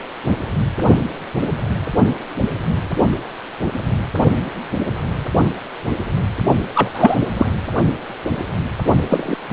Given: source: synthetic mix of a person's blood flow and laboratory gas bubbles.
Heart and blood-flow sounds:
Doppler ultrasound of blood flow; precordium
6.75-6.90 s: bubbles
6.93-7.16 s: bubbles
7.38-7.52 s: bubbles
9.10-9.36 s: bubbles
9.48-9.53 s: bubbles
From the record:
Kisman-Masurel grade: 223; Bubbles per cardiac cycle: several, 3 to 8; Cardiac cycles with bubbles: 10 to 50%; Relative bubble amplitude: loud (0.450 to 0.775); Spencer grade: 2 (many but less than half of the cardiac periods contain bubble signals, singularly or in groups); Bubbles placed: only in the low amplitude regions of the cardiac cycle

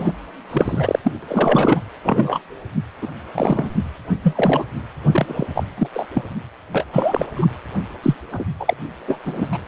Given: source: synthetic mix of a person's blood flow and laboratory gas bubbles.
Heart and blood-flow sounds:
Doppler ultrasound of blood flow; precordium
0.00-0.12 s: bubbles
0.49-0.99 s: bubbles
1.04-1.11 s: bubbles
1.22-1.80 s: bubbles
2.03-2.39 s: bubbles
3.01-3.08 s: bubbles
3.34-3.70 s: bubbles
4.23-4.65 s: bubbles
5.11-5.46 s: bubbles
5.54-5.63 s: bubbles
5.77-5.88 s: bubbles
5.93-6.06 s: bubbles
6.13-6.23 s: bubbles
6.72-6.85 s: bubbles
6.92-7.27 s: bubbles
7.35-7.46 s: bubbles
8.03-8.16 s: bubbles
8.32-8.46 s: bubbles
8.59-8.74 s: bubbles
9.08-9.18 s: bubbles
9.25-9.49 s: bubbles
9.53-9.59 s: bubbles
From the record:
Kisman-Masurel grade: 242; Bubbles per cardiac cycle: several, 3 to 8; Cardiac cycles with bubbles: 100%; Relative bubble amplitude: moderate (0.250 to 0.450); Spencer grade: 3 (all of the cardiac periods contain showers or single bubble signals, but not dominating or overriding the cardiac motion signals); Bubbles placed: anywhere in the cardiac cycle

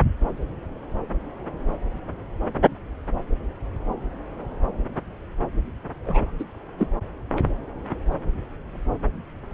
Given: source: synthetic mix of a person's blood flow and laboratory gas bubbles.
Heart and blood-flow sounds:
Doppler ultrasound of blood flow; subclavian vein
6.06-6.31 s: bubbles
6.39-6.44 s: bubbles
6.78-6.87 s: bubbles
From the record:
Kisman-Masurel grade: 212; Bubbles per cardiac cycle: several, 3 to 8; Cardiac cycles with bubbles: 1 to 10%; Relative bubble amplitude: moderate (0.250 to 0.450); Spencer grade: 1 (occasional bubble signal discernible with the cardiac motion signal, with majority of cardiac periods free of bubbles); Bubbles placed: anywhere in the cardiac cycle

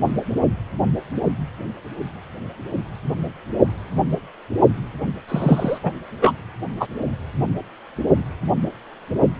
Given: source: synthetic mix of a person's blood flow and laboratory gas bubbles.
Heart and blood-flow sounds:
Doppler ultrasound of blood flow; precordium
5.29-5.79 s: bubbles
5.83-5.92 s: bubbles
6.21-6.33 s: bubbles
6.80-6.87 s: bubbles
From the record:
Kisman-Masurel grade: 213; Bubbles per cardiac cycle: several, 3 to 8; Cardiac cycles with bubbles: 1 to 10%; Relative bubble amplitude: loud (0.450 to 0.775); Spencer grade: 1 (occasional bubble signal discernible with the cardiac motion signal, with majority of cardiac periods free of bubbles); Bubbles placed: only in the low amplitude regions of the cardiac cycle

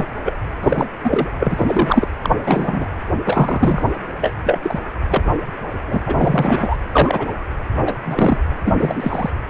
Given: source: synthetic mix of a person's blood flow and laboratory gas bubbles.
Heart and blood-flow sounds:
Doppler ultrasound of blood flow; precordium
0.00-0.06 s: bubbles
0.25-0.32 s: bubbles
0.63-0.86 s: bubbles
1.03-1.29 s: bubbles
1.40-2.08 s: bubbles
2.22-2.29 s: bubbles
2.43-2.85 s: bubbles
3.24-3.88 s: bubbles
4.21-4.34 s: bubbles
4.44-4.59 s: bubbles
4.62-4.79 s: bubbles
5.08-5.23 s: bubbles
5.87-6.00 s: bubbles
6.06-6.77 s: bubbles
6.92-7.28 s: bubbles
7.85-7.96 s: bubbles
8.04-8.38 s: bubbles
8.65-9.30 s: bubbles
From the record:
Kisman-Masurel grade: 243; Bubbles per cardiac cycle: several, 3 to 8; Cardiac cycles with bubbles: 100%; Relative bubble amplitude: loud (0.450 to 0.775); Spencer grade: 3 (all of the cardiac periods contain showers or single bubble signals, but not dominating or overriding the cardiac motion signals); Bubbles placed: anywhere in the cardiac cycle

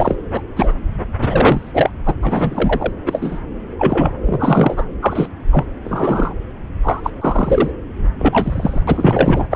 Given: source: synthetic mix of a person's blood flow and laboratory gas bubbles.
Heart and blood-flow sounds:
Doppler ultrasound of blood flow; subclavian vein
0.00-0.16 s: bubbles
0.33-0.42 s: bubbles
0.56-0.72 s: bubbles
1.19-1.90 s: bubbles
2.06-2.15 s: bubbles
2.23-2.92 s: bubbles
3.06-3.40 s: bubbles
3.79-4.12 s: bubbles
4.26-4.84 s: bubbles
5.01-5.28 s: bubbles
5.51-5.65 s: bubbles
5.85-6.33 s: bubbles
6.83-7.01 s: bubbles
7.04-7.11 s: bubbles
7.21-7.71 s: bubbles
8.19-8.83 s: bubbles
8.87-9.46 s: bubbles
9.51-9.56 s: bubbles
From the record:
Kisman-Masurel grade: 243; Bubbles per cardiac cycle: several, 3 to 8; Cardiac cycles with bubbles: 100%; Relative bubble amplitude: loud (0.450 to 0.775); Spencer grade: 3 (all of the cardiac periods contain showers or single bubble signals, but not dominating or overriding the cardiac motion signals); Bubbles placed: anywhere in the cardiac cycle

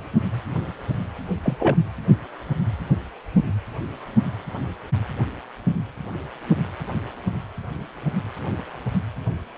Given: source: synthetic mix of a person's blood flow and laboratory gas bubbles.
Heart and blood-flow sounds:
Doppler ultrasound of blood flow; precordium
1.43-1.57 s: bubbles
1.60-1.76 s: bubbles
From the record:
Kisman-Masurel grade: 122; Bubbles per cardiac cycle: 1 to 2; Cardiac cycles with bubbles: 10 to 50%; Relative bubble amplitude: moderate (0.250 to 0.450); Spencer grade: 2 (many but less than half of the cardiac periods contain bubble signals, singularly or in groups); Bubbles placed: anywhere in the cardiac cycle

